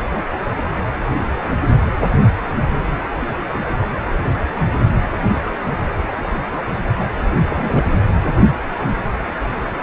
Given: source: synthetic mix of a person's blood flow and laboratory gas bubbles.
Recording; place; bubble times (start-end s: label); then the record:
Doppler ultrasound of blood flow; precordium
7.49-7.85 s: bubbles
From the record:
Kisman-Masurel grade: 212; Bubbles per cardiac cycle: several, 3 to 8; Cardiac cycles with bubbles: 1 to 10%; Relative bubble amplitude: moderate (0.250 to 0.450); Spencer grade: 1 (occasional bubble signal discernible with the cardiac motion signal, with majority of cardiac periods free of bubbles); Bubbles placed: anywhere in the cardiac cycle